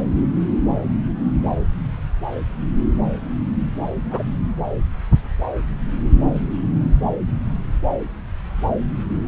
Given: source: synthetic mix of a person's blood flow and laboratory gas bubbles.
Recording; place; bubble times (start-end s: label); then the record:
Doppler ultrasound of blood flow; subclavian vein
4.10-4.22 s: bubbles
From the record:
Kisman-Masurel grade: 112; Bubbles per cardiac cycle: 1 to 2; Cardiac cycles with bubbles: 1 to 10%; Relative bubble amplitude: moderate (0.250 to 0.450); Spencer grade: 1 (occasional bubble signal discernible with the cardiac motion signal, with majority of cardiac periods free of bubbles); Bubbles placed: anywhere in the cardiac cycle